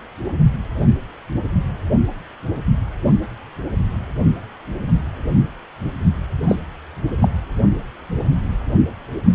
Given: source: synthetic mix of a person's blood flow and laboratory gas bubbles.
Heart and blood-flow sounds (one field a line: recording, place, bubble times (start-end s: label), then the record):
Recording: Doppler ultrasound of blood flow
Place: precordium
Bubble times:
6.47-6.55 s: bubbles
7.21-7.29 s: bubbles
From the record:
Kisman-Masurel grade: 113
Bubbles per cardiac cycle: 1 to 2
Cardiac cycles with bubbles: 1 to 10%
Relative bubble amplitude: loud (0.450 to 0.775)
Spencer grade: 1 (occasional bubble signal discernible with the cardiac motion signal, with majority of cardiac periods free of bubbles)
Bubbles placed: anywhere in the cardiac cycle